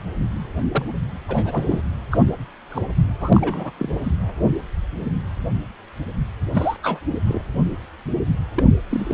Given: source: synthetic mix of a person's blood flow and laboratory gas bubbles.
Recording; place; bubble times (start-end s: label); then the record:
Doppler ultrasound of blood flow; precordium
0.72-0.84 s: bubbles
1.28-1.81 s: bubbles
2.10-2.18 s: bubbles
2.69-2.81 s: bubbles
3.20-3.71 s: bubbles
3.78-3.89 s: bubbles
4.04-4.11 s: bubbles
6.54-6.77 s: bubbles
6.83-7.01 s: bubbles
7.27-7.43 s: bubbles
8.56-8.63 s: bubbles
8.90-9.14 s: bubbles
From the record:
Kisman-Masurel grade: 222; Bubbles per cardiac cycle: several, 3 to 8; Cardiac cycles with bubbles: 10 to 50%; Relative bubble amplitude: moderate (0.250 to 0.450); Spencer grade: 2 (many but less than half of the cardiac periods contain bubble signals, singularly or in groups); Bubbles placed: anywhere in the cardiac cycle